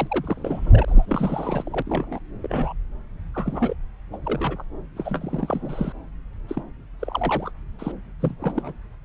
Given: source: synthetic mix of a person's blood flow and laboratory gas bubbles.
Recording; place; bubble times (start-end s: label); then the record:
Doppler ultrasound of blood flow; subclavian vein
0.00-0.85 s: bubbles
0.88-1.82 s: bubbles
1.86-2.19 s: bubbles
2.42-2.73 s: bubbles
3.34-3.74 s: bubbles
4.12-4.17 s: bubbles
4.23-4.64 s: bubbles
4.96-5.92 s: bubbles
6.48-6.62 s: bubbles
7.00-7.52 s: bubbles
7.79-7.92 s: bubbles
8.20-8.36 s: bubbles
8.40-8.73 s: bubbles
From the record:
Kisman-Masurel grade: 342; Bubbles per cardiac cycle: rolling drumbeat, 9 or more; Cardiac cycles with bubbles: 100%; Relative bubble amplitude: moderate (0.250 to 0.450); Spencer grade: 3 (all of the cardiac periods contain showers or single bubble signals, but not dominating or overriding the cardiac motion signals); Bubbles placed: anywhere in the cardiac cycle